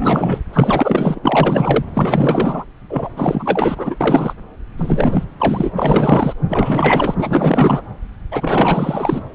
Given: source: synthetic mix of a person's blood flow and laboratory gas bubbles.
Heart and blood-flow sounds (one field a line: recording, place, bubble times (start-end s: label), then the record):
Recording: Doppler ultrasound of blood flow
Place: subclavian vein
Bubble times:
0.00-0.44 s: bubbles
0.53-1.19 s: bubbles
1.23-1.84 s: bubbles
1.93-2.65 s: bubbles
2.89-3.09 s: bubbles
3.16-3.96 s: bubbles
4.00-4.34 s: bubbles
4.76-5.25 s: bubbles
5.38-5.70 s: bubbles
5.76-6.33 s: bubbles
6.49-7.82 s: bubbles
8.31-9.23 s: bubbles
From the record:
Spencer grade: 4 (maximum detectable bubble signal sounding continuously throughout systole and diastole of every cardiac period, and overriding the amplitude of the normal cardiac signals)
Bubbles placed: anywhere in the cardiac cycle